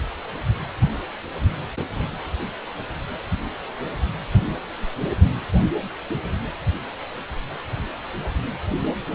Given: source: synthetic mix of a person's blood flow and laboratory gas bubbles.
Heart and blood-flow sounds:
Doppler ultrasound of blood flow; precordium
no bubbles
From the record:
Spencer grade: 0 (complete lack of bubble signals)

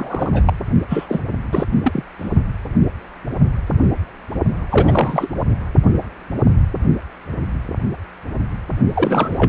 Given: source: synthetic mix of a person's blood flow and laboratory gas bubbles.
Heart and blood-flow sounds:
Doppler ultrasound of blood flow; precordium
0.00-0.30 s: bubbles
0.33-0.53 s: bubbles
0.88-1.06 s: bubbles
1.08-1.19 s: bubbles
1.51-1.64 s: bubbles
1.84-2.04 s: bubbles
2.18-2.29 s: bubbles
4.70-5.29 s: bubbles
8.93-9.48 s: bubbles
From the record:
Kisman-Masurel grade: 332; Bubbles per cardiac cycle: rolling drumbeat, 9 or more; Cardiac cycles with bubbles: 50 to 99%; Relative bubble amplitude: moderate (0.250 to 0.450); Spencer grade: 3 (all of the cardiac periods contain showers or single bubble signals, but not dominating or overriding the cardiac motion signals); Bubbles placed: only in the low amplitude regions of the cardiac cycle

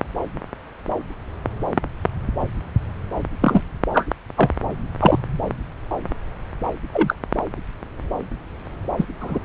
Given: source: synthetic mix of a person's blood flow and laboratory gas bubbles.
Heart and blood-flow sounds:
Doppler ultrasound of blood flow; subclavian vein
3.41-3.61 s: bubbles
3.93-4.07 s: bubbles
4.37-4.50 s: bubbles
5.00-5.18 s: bubbles
6.92-7.16 s: bubbles
8.96-9.05 s: bubbles
9.20-9.39 s: bubbles
From the record:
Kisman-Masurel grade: 123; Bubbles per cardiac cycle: 1 to 2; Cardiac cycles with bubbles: 10 to 50%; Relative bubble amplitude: loud (0.450 to 0.775); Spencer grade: 2 (many but less than half of the cardiac periods contain bubble signals, singularly or in groups); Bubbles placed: anywhere in the cardiac cycle

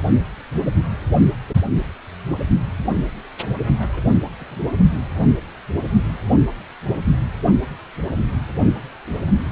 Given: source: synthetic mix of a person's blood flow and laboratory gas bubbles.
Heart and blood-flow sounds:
Doppler ultrasound of blood flow; precordium
3.78-4.03 s: bubbles
4.06-4.18 s: bubbles
4.24-4.29 s: bubbles
4.38-4.61 s: bubbles
From the record:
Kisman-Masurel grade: 211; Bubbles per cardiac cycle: several, 3 to 8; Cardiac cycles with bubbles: 1 to 10%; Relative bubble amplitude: barely perceptible (0.100 to 0.250); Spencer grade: 1 (occasional bubble signal discernible with the cardiac motion signal, with majority of cardiac periods free of bubbles); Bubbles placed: only in the low amplitude regions of the cardiac cycle

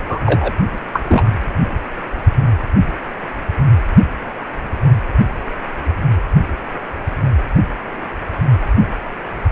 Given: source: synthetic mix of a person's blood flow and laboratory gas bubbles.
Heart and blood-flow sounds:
Doppler ultrasound of blood flow; precordium
0.09-0.20 s: bubbles
0.26-0.52 s: bubbles
0.93-1.03 s: bubbles
1.05-1.34 s: bubbles
From the record:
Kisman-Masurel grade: 213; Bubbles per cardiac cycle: several, 3 to 8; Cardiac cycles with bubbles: 1 to 10%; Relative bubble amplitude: loud (0.450 to 0.775); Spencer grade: 1 (occasional bubble signal discernible with the cardiac motion signal, with majority of cardiac periods free of bubbles); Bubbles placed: anywhere in the cardiac cycle

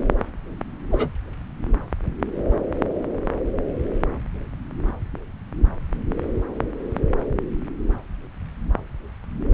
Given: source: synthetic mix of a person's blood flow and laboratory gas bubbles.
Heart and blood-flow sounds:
Doppler ultrasound of blood flow; subclavian vein
0.91-1.10 s: bubbles
From the record:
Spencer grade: 1 (occasional bubble signal discernible with the cardiac motion signal, with majority of cardiac periods free of bubbles); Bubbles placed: anywhere in the cardiac cycle

